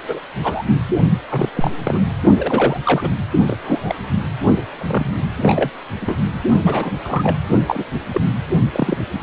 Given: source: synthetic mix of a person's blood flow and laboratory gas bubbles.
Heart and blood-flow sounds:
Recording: Doppler ultrasound of blood flow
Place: precordium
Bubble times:
0.08-0.20 s: bubbles
0.42-0.64 s: bubbles
1.30-1.49 s: bubbles
1.54-1.71 s: bubbles
1.83-2.07 s: bubbles
2.38-2.80 s: bubbles
2.84-3.10 s: bubbles
3.48-3.57 s: bubbles
3.61-3.95 s: bubbles
4.14-4.27 s: bubbles
4.78-5.14 s: bubbles
5.37-5.71 s: bubbles
6.01-6.16 s: bubbles
6.65-6.93 s: bubbles
7.04-7.38 s: bubbles
7.67-7.85 s: bubbles
8.11-8.21 s: bubbles
8.72-8.98 s: bubbles
From the record:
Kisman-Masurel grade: 232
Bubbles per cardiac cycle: several, 3 to 8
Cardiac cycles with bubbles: 50 to 99%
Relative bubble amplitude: moderate (0.250 to 0.450)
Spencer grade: 3 (all of the cardiac periods contain showers or single bubble signals, but not dominating or overriding the cardiac motion signals)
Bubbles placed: only in the low amplitude regions of the cardiac cycle

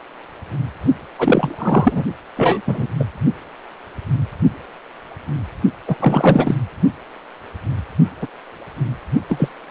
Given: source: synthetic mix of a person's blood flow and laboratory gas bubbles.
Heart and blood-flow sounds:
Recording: Doppler ultrasound of blood flow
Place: precordium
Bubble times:
1.18-2.04 s: bubbles
2.37-2.62 s: bubbles
2.67-2.87 s: bubbles
2.99-3.04 s: bubbles
5.87-5.96 s: bubbles
6.00-6.55 s: bubbles
8.21-8.28 s: bubbles
9.29-9.48 s: bubbles
From the record:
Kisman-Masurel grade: 233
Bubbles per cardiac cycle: several, 3 to 8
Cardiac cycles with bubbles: 50 to 99%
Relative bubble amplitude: loud (0.450 to 0.775)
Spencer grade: 3 (all of the cardiac periods contain showers or single bubble signals, but not dominating or overriding the cardiac motion signals)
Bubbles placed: only in the low amplitude regions of the cardiac cycle

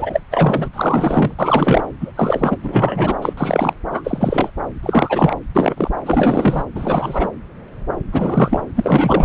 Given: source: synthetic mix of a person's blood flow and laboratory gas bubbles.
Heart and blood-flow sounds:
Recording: Doppler ultrasound of blood flow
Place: subclavian vein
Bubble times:
0.00-0.21 s: bubbles
0.31-0.69 s: bubbles
0.73-1.34 s: bubbles
1.39-1.82 s: bubbles
2.00-2.12 s: bubbles
2.16-2.57 s: bubbles
2.62-3.16 s: bubbles
3.21-3.33 s: bubbles
3.37-3.73 s: bubbles
3.92-4.50 s: bubbles
4.83-5.35 s: bubbles
5.55-5.91 s: bubbles
6.05-6.63 s: bubbles
6.75-7.29 s: bubbles
8.12-8.61 s: bubbles
8.76-9.25 s: bubbles
From the record:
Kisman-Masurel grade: 333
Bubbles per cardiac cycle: rolling drumbeat, 9 or more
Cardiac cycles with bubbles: 50 to 99%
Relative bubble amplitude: loud (0.450 to 0.775)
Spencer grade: 3 (all of the cardiac periods contain showers or single bubble signals, but not dominating or overriding the cardiac motion signals)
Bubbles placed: anywhere in the cardiac cycle

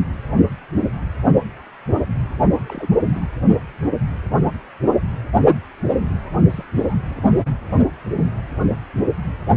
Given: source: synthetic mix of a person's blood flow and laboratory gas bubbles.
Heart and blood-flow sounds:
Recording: Doppler ultrasound of blood flow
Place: precordium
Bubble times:
2.69-2.96 s: bubbles
3.14-3.21 s: bubbles
6.50-6.66 s: bubbles
6.76-7.37 s: bubbles
7.40-7.48 s: bubbles
From the record:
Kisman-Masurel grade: 221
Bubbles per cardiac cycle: several, 3 to 8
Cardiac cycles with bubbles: 10 to 50%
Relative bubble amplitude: barely perceptible (0.100 to 0.250)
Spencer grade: 2 (many but less than half of the cardiac periods contain bubble signals, singularly or in groups)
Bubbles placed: only in the low amplitude regions of the cardiac cycle

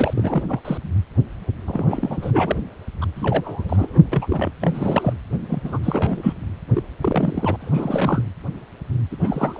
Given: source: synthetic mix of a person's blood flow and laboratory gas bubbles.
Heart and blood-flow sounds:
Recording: Doppler ultrasound of blood flow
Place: precordium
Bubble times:
0.00-0.44 s: bubbles
0.49-0.59 s: bubbles
0.65-0.77 s: bubbles
1.67-2.56 s: bubbles
3.01-3.05 s: bubbles
3.15-4.01 s: bubbles
4.12-4.26 s: bubbles
4.29-4.50 s: bubbles
4.61-5.13 s: bubbles
5.49-5.78 s: bubbles
5.83-6.34 s: bubbles
6.73-6.83 s: bubbles
7.01-7.56 s: bubbles
7.60-8.24 s: bubbles
9.11-9.16 s: bubbles
9.19-9.60 s: bubbles
From the record:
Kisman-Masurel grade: 332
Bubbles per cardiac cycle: rolling drumbeat, 9 or more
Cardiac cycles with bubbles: 50 to 99%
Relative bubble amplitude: moderate (0.250 to 0.450)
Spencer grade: 3 (all of the cardiac periods contain showers or single bubble signals, but not dominating or overriding the cardiac motion signals)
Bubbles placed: anywhere in the cardiac cycle

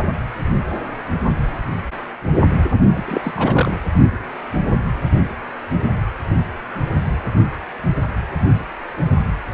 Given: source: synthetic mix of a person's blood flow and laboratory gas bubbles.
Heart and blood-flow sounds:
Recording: Doppler ultrasound of blood flow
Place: precordium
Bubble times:
2.91-3.04 s: bubbles
3.07-3.33 s: bubbles
3.37-3.77 s: bubbles
From the record:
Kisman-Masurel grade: 212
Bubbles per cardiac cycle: several, 3 to 8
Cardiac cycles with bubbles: 1 to 10%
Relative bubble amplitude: moderate (0.250 to 0.450)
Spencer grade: 1 (occasional bubble signal discernible with the cardiac motion signal, with majority of cardiac periods free of bubbles)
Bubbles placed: anywhere in the cardiac cycle

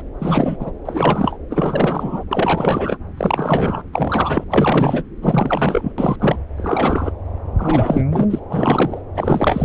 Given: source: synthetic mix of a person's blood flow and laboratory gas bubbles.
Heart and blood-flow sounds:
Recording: Doppler ultrasound of blood flow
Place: subclavian vein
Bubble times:
0.00-0.02 s: bubbles
0.19-0.71 s: bubbles
0.85-1.36 s: bubbles
1.50-2.23 s: bubbles
2.31-2.98 s: bubbles
3.17-3.81 s: bubbles
3.92-4.44 s: bubbles
4.50-5.04 s: bubbles
5.22-5.92 s: bubbles
5.98-6.16 s: bubbles
6.20-6.37 s: bubbles
6.58-7.12 s: bubbles
7.58-8.04 s: bubbles
8.11-8.27 s: bubbles
8.30-8.39 s: bubbles
8.49-9.02 s: bubbles
9.15-9.64 s: bubbles
From the record:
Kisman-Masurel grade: 343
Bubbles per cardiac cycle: rolling drumbeat, 9 or more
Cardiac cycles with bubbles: 100%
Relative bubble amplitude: loud (0.450 to 0.775)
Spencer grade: 3 (all of the cardiac periods contain showers or single bubble signals, but not dominating or overriding the cardiac motion signals)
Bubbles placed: anywhere in the cardiac cycle

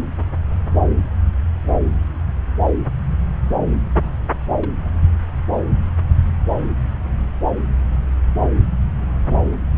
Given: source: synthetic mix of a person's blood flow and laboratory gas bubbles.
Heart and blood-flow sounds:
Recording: Doppler ultrasound of blood flow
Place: subclavian vein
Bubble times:
4.03-4.09 s: bubbles
4.54-4.73 s: bubbles
From the record:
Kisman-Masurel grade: 111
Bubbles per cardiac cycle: 1 to 2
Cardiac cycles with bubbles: 1 to 10%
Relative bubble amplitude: barely perceptible (0.100 to 0.250)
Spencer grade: 1 (occasional bubble signal discernible with the cardiac motion signal, with majority of cardiac periods free of bubbles)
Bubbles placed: anywhere in the cardiac cycle

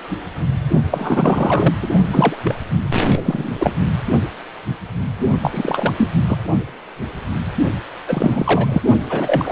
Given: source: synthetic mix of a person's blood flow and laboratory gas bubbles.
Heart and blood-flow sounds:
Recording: Doppler ultrasound of blood flow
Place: precordium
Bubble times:
0.89-1.75 s: bubbles
1.82-1.88 s: bubbles
2.13-2.37 s: bubbles
2.43-2.55 s: bubbles
2.94-3.21 s: bubbles
3.25-3.57 s: bubbles
3.59-3.76 s: bubbles
5.42-5.93 s: bubbles
5.98-6.10 s: bubbles
6.15-6.24 s: bubbles
6.27-6.38 s: bubbles
8.08-8.82 s: bubbles
9.09-9.52 s: bubbles
From the record:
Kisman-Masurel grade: 333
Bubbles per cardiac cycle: rolling drumbeat, 9 or more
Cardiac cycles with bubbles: 50 to 99%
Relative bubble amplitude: loud (0.450 to 0.775)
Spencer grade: 3 (all of the cardiac periods contain showers or single bubble signals, but not dominating or overriding the cardiac motion signals)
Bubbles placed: only in the low amplitude regions of the cardiac cycle

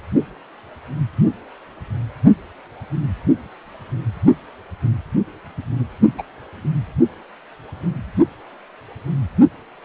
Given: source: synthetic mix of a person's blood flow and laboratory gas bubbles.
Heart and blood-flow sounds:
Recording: Doppler ultrasound of blood flow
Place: precordium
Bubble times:
6.18-6.23 s: bubbles
From the record:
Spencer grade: 1 (occasional bubble signal discernible with the cardiac motion signal, with majority of cardiac periods free of bubbles)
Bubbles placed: anywhere in the cardiac cycle

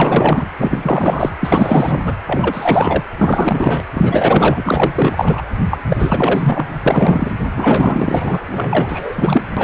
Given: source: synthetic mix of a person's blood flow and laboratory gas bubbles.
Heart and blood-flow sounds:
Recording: Doppler ultrasound of blood flow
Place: precordium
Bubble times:
0.00-0.47 s: bubbles
0.58-0.78 s: bubbles
0.82-1.29 s: bubbles
1.40-2.00 s: bubbles
2.03-2.16 s: bubbles
2.26-3.04 s: bubbles
3.17-3.82 s: bubbles
3.93-5.42 s: bubbles
5.70-5.79 s: bubbles
5.89-6.66 s: bubbles
6.86-7.32 s: bubbles
7.55-8.38 s: bubbles
8.51-9.42 s: bubbles
9.56-9.64 s: bubbles
From the record:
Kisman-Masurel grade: 444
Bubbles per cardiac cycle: continuous sound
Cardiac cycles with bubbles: 100%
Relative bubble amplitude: maximal (0.775 to 0.999)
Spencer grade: 4 (maximum detectable bubble signal sounding continuously throughout systole and diastole of every cardiac period, and overriding the amplitude of the normal cardiac signals)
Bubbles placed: anywhere in the cardiac cycle

